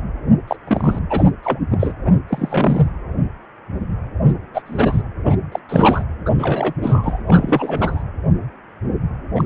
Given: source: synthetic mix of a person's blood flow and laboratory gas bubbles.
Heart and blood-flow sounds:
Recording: Doppler ultrasound of blood flow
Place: precordium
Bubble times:
0.47-0.56 s: bubbles
0.67-0.99 s: bubbles
1.09-1.30 s: bubbles
1.43-1.59 s: bubbles
1.71-1.92 s: bubbles
2.04-2.12 s: bubbles
2.29-2.87 s: bubbles
4.25-4.33 s: bubbles
4.54-4.62 s: bubbles
4.66-5.03 s: bubbles
5.25-5.36 s: bubbles
5.51-5.59 s: bubbles
5.69-6.04 s: bubbles
6.25-6.30 s: bubbles
6.38-6.74 s: bubbles
6.81-7.22 s: bubbles
7.25-8.03 s: bubbles
9.35-9.44 s: bubbles
From the record:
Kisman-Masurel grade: 233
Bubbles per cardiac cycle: several, 3 to 8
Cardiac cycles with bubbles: 50 to 99%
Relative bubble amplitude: loud (0.450 to 0.775)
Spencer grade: 3 (all of the cardiac periods contain showers or single bubble signals, but not dominating or overriding the cardiac motion signals)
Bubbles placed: anywhere in the cardiac cycle

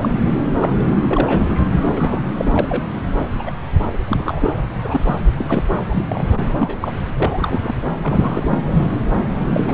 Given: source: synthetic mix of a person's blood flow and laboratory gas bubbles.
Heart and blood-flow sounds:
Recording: Doppler ultrasound of blood flow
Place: subclavian vein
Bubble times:
0.01-0.14 s: bubbles
0.32-0.42 s: bubbles
0.58-0.72 s: bubbles
1.11-1.47 s: bubbles
1.76-2.21 s: bubbles
2.37-2.83 s: bubbles
3.39-3.52 s: bubbles
3.93-4.00 s: bubbles
4.08-4.53 s: bubbles
4.83-5.15 s: bubbles
5.38-5.62 s: bubbles
5.88-6.46 s: bubbles
6.58-6.77 s: bubbles
6.80-6.92 s: bubbles
7.17-7.75 s: bubbles
8.03-8.63 s: bubbles
8.71-8.87 s: bubbles
8.90-8.98 s: bubbles
9.46-9.74 s: bubbles
From the record:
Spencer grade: 3 (all of the cardiac periods contain showers or single bubble signals, but not dominating or overriding the cardiac motion signals)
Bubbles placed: anywhere in the cardiac cycle

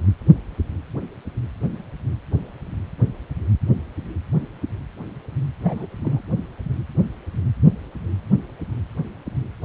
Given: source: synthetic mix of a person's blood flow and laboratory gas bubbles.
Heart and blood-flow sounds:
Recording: Doppler ultrasound of blood flow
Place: precordium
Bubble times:
5.60-5.87 s: bubbles
6.03-6.22 s: bubbles
From the record:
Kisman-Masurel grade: 111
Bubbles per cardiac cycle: 1 to 2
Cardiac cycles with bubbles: 1 to 10%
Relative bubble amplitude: barely perceptible (0.100 to 0.250)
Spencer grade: 1 (occasional bubble signal discernible with the cardiac motion signal, with majority of cardiac periods free of bubbles)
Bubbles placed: anywhere in the cardiac cycle

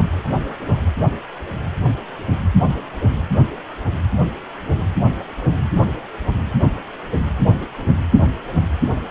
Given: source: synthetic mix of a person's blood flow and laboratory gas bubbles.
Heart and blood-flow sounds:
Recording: Doppler ultrasound of blood flow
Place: precordium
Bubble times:
no bubbles
From the record:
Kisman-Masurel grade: 000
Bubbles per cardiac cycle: 0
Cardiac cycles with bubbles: 0%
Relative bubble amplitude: no bubbles discernible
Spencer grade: 0 (complete lack of bubble signals)

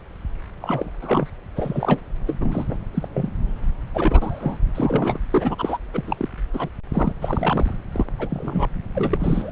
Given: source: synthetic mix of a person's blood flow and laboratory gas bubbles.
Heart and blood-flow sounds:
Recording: Doppler ultrasound of blood flow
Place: subclavian vein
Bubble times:
0.61-0.91 s: bubbles
1.02-1.27 s: bubbles
1.56-2.00 s: bubbles
2.26-2.36 s: bubbles
2.40-2.66 s: bubbles
2.69-2.76 s: bubbles
2.94-3.08 s: bubbles
3.14-3.31 s: bubbles
3.93-4.58 s: bubbles
4.75-5.18 s: bubbles
5.30-5.77 s: bubbles
5.93-6.29 s: bubbles
6.54-6.70 s: bubbles
6.93-7.13 s: bubbles
7.21-7.77 s: bubbles
7.92-8.06 s: bubbles
8.19-8.68 s: bubbles
8.95-9.52 s: bubbles
From the record:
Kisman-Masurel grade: 242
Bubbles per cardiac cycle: several, 3 to 8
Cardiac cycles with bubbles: 100%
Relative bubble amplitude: moderate (0.250 to 0.450)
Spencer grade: 3 (all of the cardiac periods contain showers or single bubble signals, but not dominating or overriding the cardiac motion signals)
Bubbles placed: anywhere in the cardiac cycle

